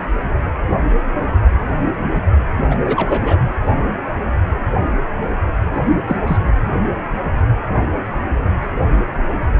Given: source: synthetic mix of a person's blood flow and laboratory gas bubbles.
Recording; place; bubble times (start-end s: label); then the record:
Doppler ultrasound of blood flow; precordium
2.71-2.79 s: bubbles
2.85-3.38 s: bubbles
5.74-5.83 s: bubbles
6.08-6.16 s: bubbles
6.26-6.37 s: bubbles
From the record:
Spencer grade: 2 (many but less than half of the cardiac periods contain bubble signals, singularly or in groups); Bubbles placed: anywhere in the cardiac cycle